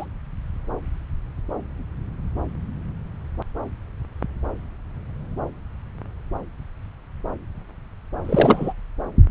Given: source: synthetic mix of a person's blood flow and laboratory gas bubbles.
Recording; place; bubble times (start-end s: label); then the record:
Doppler ultrasound of blood flow; subclavian vein
0.00-0.06 s: bubbles
8.24-8.73 s: bubbles
From the record:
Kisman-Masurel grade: 212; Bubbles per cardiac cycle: several, 3 to 8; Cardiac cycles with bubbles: 1 to 10%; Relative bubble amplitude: moderate (0.250 to 0.450); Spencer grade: 1 (occasional bubble signal discernible with the cardiac motion signal, with majority of cardiac periods free of bubbles); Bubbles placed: anywhere in the cardiac cycle